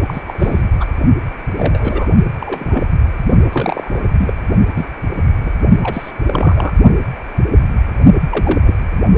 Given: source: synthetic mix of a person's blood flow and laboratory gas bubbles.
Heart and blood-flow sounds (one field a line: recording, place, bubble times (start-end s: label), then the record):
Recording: Doppler ultrasound of blood flow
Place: precordium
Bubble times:
0.07-0.22 s: bubbles
0.28-0.65 s: bubbles
0.80-0.86 s: bubbles
1.56-2.08 s: bubbles
2.41-2.87 s: bubbles
3.52-4.01 s: bubbles
4.19-4.33 s: bubbles
4.75-4.87 s: bubbles
5.41-5.50 s: bubbles
5.83-6.11 s: bubbles
6.26-6.73 s: bubbles
8.29-8.60 s: bubbles
8.66-8.75 s: bubbles
From the record:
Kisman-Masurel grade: 232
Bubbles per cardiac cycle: several, 3 to 8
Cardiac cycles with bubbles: 50 to 99%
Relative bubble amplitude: moderate (0.250 to 0.450)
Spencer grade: 3 (all of the cardiac periods contain showers or single bubble signals, but not dominating or overriding the cardiac motion signals)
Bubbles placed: only in the low amplitude regions of the cardiac cycle